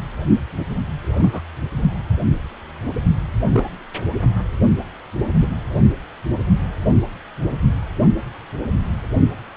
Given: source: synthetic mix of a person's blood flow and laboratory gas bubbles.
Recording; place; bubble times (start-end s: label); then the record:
Doppler ultrasound of blood flow; precordium
1.11-1.42 s: bubbles
3.52-3.69 s: bubbles
5.41-5.48 s: bubbles
From the record:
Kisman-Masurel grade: 122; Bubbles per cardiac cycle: 1 to 2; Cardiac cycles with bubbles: 10 to 50%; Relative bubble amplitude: moderate (0.250 to 0.450); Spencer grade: 2 (many but less than half of the cardiac periods contain bubble signals, singularly or in groups); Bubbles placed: only in the low amplitude regions of the cardiac cycle